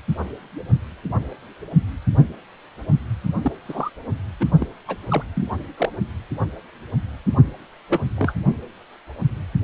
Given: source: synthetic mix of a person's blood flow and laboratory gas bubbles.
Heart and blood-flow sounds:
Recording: Doppler ultrasound of blood flow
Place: precordium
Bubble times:
3.42-3.52 s: bubbles
3.68-3.90 s: bubbles
4.39-4.46 s: bubbles
4.59-4.66 s: bubbles
4.87-4.96 s: bubbles
5.08-5.23 s: bubbles
5.35-5.50 s: bubbles
5.77-5.89 s: bubbles
7.90-8.02 s: bubbles
8.17-8.34 s: bubbles
From the record:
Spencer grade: 3 (all of the cardiac periods contain showers or single bubble signals, but not dominating or overriding the cardiac motion signals)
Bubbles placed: only in the low amplitude regions of the cardiac cycle

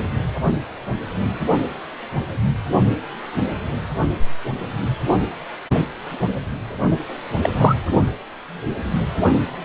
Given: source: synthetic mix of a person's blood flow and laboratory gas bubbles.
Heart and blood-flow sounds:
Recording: Doppler ultrasound of blood flow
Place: precordium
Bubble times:
7.42-7.50 s: bubbles
7.57-7.75 s: bubbles
From the record:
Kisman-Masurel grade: 113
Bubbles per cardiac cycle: 1 to 2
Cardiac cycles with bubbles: 1 to 10%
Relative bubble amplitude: loud (0.450 to 0.775)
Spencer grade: 1 (occasional bubble signal discernible with the cardiac motion signal, with majority of cardiac periods free of bubbles)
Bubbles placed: only in the low amplitude regions of the cardiac cycle

